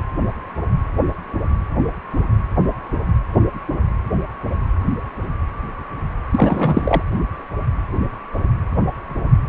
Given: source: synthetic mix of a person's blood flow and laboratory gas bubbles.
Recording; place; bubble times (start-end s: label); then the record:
Doppler ultrasound of blood flow; precordium
6.31-7.02 s: bubbles
From the record:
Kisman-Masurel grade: 213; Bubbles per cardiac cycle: several, 3 to 8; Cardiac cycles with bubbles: 1 to 10%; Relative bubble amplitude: loud (0.450 to 0.775); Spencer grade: 1 (occasional bubble signal discernible with the cardiac motion signal, with majority of cardiac periods free of bubbles); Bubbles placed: anywhere in the cardiac cycle